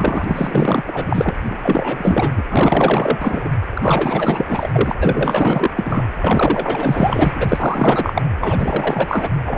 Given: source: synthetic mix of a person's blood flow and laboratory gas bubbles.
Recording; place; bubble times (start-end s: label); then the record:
Doppler ultrasound of blood flow; precordium
0.00-0.82 s: bubbles
0.86-1.34 s: bubbles
1.46-2.43 s: bubbles
2.50-3.49 s: bubbles
3.74-4.46 s: bubbles
4.48-4.94 s: bubbles
5.00-5.71 s: bubbles
5.76-6.09 s: bubbles
6.19-7.31 s: bubbles
7.35-8.22 s: bubbles
8.40-9.31 s: bubbles
9.46-9.58 s: bubbles
From the record:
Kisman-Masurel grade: 444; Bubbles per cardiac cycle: continuous sound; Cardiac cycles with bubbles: 100%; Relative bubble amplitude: maximal (0.775 to 0.999); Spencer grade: 4 (maximum detectable bubble signal sounding continuously throughout systole and diastole of every cardiac period, and overriding the amplitude of the normal cardiac signals); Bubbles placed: anywhere in the cardiac cycle